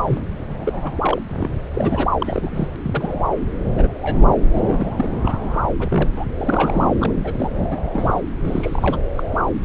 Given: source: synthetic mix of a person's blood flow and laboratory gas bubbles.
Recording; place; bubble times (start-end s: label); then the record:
Doppler ultrasound of blood flow; subclavian vein
0.00-0.19 s: bubbles
0.48-0.54 s: bubbles
0.56-0.93 s: bubbles
1.02-1.22 s: bubbles
1.29-1.48 s: bubbles
1.74-2.08 s: bubbles
2.19-2.68 s: bubbles
2.83-3.23 s: bubbles
3.78-3.88 s: bubbles
4.01-4.36 s: bubbles
4.55-4.61 s: bubbles
4.67-5.10 s: bubbles
5.25-5.62 s: bubbles
5.79-6.25 s: bubbles
6.37-6.95 s: bubbles
7.00-7.11 s: bubbles
7.24-7.51 s: bubbles
7.71-7.78 s: bubbles
7.92-8.21 s: bubbles
8.45-8.97 s: bubbles
9.15-9.23 s: bubbles
9.53-9.64 s: bubbles
From the record:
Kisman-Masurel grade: 242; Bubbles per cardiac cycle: several, 3 to 8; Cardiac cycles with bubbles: 100%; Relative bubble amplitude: moderate (0.250 to 0.450); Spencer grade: 3 (all of the cardiac periods contain showers or single bubble signals, but not dominating or overriding the cardiac motion signals); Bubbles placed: anywhere in the cardiac cycle